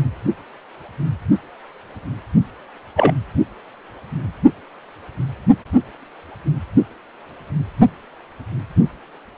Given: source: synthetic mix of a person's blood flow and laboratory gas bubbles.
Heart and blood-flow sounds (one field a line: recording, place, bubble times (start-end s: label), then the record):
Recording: Doppler ultrasound of blood flow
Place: precordium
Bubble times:
2.95-3.12 s: bubbles
From the record:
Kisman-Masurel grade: 113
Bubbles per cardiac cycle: 1 to 2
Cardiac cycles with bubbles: 1 to 10%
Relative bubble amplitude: loud (0.450 to 0.775)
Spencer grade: 1 (occasional bubble signal discernible with the cardiac motion signal, with majority of cardiac periods free of bubbles)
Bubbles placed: only in the low amplitude regions of the cardiac cycle